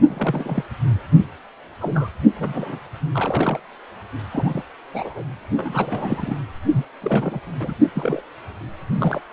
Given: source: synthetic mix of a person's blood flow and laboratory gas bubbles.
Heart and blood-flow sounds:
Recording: Doppler ultrasound of blood flow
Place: precordium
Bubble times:
0.07-0.66 s: bubbles
1.80-2.10 s: bubbles
2.35-2.79 s: bubbles
3.14-3.60 s: bubbles
4.32-4.62 s: bubbles
4.94-5.23 s: bubbles
5.57-6.36 s: bubbles
6.70-6.85 s: bubbles
7.01-7.40 s: bubbles
7.60-7.74 s: bubbles
7.80-7.86 s: bubbles
7.95-8.22 s: bubbles
8.95-9.21 s: bubbles
From the record:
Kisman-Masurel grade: 242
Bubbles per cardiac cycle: several, 3 to 8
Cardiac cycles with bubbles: 100%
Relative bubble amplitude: moderate (0.250 to 0.450)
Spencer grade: 3 (all of the cardiac periods contain showers or single bubble signals, but not dominating or overriding the cardiac motion signals)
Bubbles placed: anywhere in the cardiac cycle

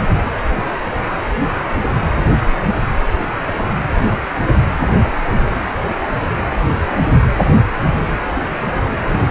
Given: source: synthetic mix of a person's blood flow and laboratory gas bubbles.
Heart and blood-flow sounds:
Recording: Doppler ultrasound of blood flow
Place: precordium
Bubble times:
9.07-9.19 s: bubbles
From the record:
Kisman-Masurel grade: 112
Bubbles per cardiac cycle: 1 to 2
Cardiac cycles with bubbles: 1 to 10%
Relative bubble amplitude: moderate (0.250 to 0.450)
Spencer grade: 1 (occasional bubble signal discernible with the cardiac motion signal, with majority of cardiac periods free of bubbles)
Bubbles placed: anywhere in the cardiac cycle

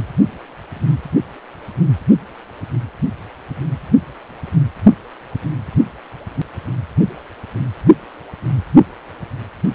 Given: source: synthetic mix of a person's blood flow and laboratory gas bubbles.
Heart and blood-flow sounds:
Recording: Doppler ultrasound of blood flow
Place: precordium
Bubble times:
no bubbles
From the record:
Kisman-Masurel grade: 000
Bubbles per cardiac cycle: 0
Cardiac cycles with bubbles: 0%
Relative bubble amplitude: no bubbles discernible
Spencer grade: 0 (complete lack of bubble signals)

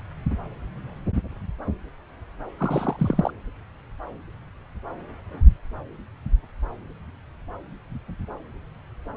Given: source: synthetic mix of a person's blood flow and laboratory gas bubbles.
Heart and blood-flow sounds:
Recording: Doppler ultrasound of blood flow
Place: subclavian vein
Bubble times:
2.58-3.31 s: bubbles
From the record:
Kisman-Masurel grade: 212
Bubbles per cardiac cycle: several, 3 to 8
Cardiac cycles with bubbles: 1 to 10%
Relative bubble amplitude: moderate (0.250 to 0.450)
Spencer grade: 1 (occasional bubble signal discernible with the cardiac motion signal, with majority of cardiac periods free of bubbles)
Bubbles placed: anywhere in the cardiac cycle

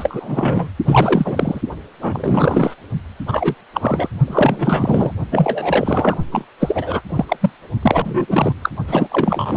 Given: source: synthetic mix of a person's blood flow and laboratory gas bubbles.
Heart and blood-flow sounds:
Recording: Doppler ultrasound of blood flow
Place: precordium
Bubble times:
0.00-0.69 s: bubbles
0.85-1.61 s: bubbles
2.02-2.75 s: bubbles
3.27-3.54 s: bubbles
3.74-4.08 s: bubbles
4.27-5.12 s: bubbles
5.31-6.18 s: bubbles
6.32-6.46 s: bubbles
6.60-7.02 s: bubbles
7.09-7.25 s: bubbles
7.28-7.37 s: bubbles
7.40-7.50 s: bubbles
7.82-8.54 s: bubbles
8.62-8.70 s: bubbles
8.87-9.08 s: bubbles
9.11-9.56 s: bubbles
From the record:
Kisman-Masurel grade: 343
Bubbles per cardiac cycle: rolling drumbeat, 9 or more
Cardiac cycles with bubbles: 100%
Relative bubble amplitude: loud (0.450 to 0.775)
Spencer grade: 3 (all of the cardiac periods contain showers or single bubble signals, but not dominating or overriding the cardiac motion signals)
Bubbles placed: only in the low amplitude regions of the cardiac cycle

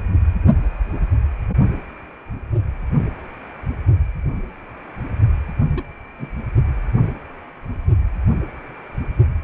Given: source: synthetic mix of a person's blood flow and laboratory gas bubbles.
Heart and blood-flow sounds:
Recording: Doppler ultrasound of blood flow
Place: precordium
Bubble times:
5.76-5.83 s: bubbles
6.17-6.31 s: bubbles
From the record:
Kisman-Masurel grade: 111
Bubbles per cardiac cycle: 1 to 2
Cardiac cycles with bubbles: 1 to 10%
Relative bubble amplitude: barely perceptible (0.100 to 0.250)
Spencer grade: 1 (occasional bubble signal discernible with the cardiac motion signal, with majority of cardiac periods free of bubbles)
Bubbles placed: only in the low amplitude regions of the cardiac cycle

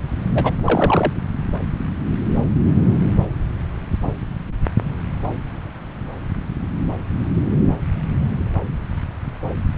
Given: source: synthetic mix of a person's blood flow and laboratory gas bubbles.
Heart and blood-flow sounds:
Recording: Doppler ultrasound of blood flow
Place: subclavian vein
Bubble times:
0.34-0.54 s: bubbles
0.64-1.13 s: bubbles
From the record:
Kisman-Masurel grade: 212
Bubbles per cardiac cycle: several, 3 to 8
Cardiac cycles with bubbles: 1 to 10%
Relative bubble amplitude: moderate (0.250 to 0.450)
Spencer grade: 1 (occasional bubble signal discernible with the cardiac motion signal, with majority of cardiac periods free of bubbles)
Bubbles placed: anywhere in the cardiac cycle

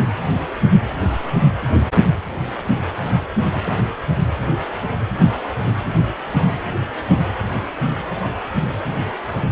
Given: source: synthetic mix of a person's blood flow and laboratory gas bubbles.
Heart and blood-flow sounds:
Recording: Doppler ultrasound of blood flow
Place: precordium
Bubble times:
3.66-3.71 s: bubbles
From the record:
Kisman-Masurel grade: 121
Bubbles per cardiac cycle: 1 to 2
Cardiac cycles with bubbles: 10 to 50%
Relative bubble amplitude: barely perceptible (0.100 to 0.250)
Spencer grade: 2 (many but less than half of the cardiac periods contain bubble signals, singularly or in groups)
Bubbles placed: anywhere in the cardiac cycle

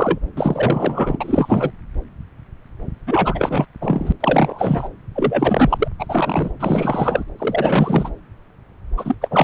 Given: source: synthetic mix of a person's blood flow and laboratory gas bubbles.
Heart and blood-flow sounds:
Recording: Doppler ultrasound of blood flow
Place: subclavian vein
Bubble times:
0.00-0.18 s: bubbles
0.36-1.72 s: bubbles
3.06-3.65 s: bubbles
3.81-4.12 s: bubbles
4.20-4.89 s: bubbles
5.15-5.88 s: bubbles
5.99-6.06 s: bubbles
6.08-6.50 s: bubbles
6.59-7.24 s: bubbles
7.38-8.12 s: bubbles
8.97-9.15 s: bubbles
9.21-9.44 s: bubbles
From the record:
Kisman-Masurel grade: 333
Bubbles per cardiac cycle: rolling drumbeat, 9 or more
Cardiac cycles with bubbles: 50 to 99%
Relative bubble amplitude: loud (0.450 to 0.775)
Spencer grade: 3 (all of the cardiac periods contain showers or single bubble signals, but not dominating or overriding the cardiac motion signals)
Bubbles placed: anywhere in the cardiac cycle

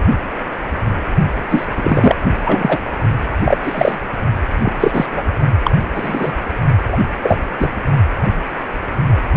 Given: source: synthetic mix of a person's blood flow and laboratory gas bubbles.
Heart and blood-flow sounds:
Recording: Doppler ultrasound of blood flow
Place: precordium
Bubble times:
1.49-1.65 s: bubbles
1.75-2.15 s: bubbles
2.44-2.78 s: bubbles
3.45-3.57 s: bubbles
3.63-3.96 s: bubbles
4.62-4.73 s: bubbles
4.80-5.06 s: bubbles
5.12-5.23 s: bubbles
5.63-5.71 s: bubbles
5.94-6.33 s: bubbles
6.92-6.98 s: bubbles
7.23-7.39 s: bubbles
7.59-7.68 s: bubbles
From the record:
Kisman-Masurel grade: 233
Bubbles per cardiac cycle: several, 3 to 8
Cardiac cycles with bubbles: 50 to 99%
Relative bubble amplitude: loud (0.450 to 0.775)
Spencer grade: 3 (all of the cardiac periods contain showers or single bubble signals, but not dominating or overriding the cardiac motion signals)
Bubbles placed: only in the low amplitude regions of the cardiac cycle

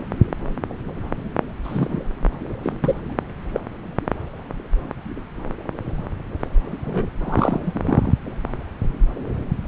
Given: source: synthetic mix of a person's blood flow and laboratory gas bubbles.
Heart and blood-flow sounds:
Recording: Doppler ultrasound of blood flow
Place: subclavian vein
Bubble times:
1.63-2.00 s: bubbles
2.63-2.72 s: bubbles
2.83-2.95 s: bubbles
3.53-3.60 s: bubbles
6.85-7.08 s: bubbles
7.20-8.14 s: bubbles
From the record:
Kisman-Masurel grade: 222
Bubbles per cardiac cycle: several, 3 to 8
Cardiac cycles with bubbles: 10 to 50%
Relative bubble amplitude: moderate (0.250 to 0.450)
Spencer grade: 2 (many but less than half of the cardiac periods contain bubble signals, singularly or in groups)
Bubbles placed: anywhere in the cardiac cycle

